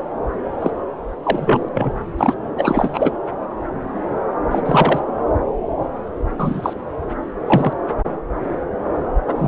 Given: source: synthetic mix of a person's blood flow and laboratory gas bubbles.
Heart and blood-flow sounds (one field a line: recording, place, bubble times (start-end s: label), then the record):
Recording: Doppler ultrasound of blood flow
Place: subclavian vein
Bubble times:
0.61-0.71 s: bubbles
1.23-1.69 s: bubbles
1.74-1.93 s: bubbles
2.17-2.34 s: bubbles
2.57-3.11 s: bubbles
4.50-4.62 s: bubbles
4.65-5.00 s: bubbles
6.37-6.73 s: bubbles
7.46-7.73 s: bubbles
9.27-9.35 s: bubbles
9.38-9.48 s: bubbles
From the record:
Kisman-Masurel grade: 233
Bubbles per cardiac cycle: several, 3 to 8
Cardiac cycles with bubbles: 50 to 99%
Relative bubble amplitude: loud (0.450 to 0.775)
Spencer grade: 3 (all of the cardiac periods contain showers or single bubble signals, but not dominating or overriding the cardiac motion signals)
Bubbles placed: anywhere in the cardiac cycle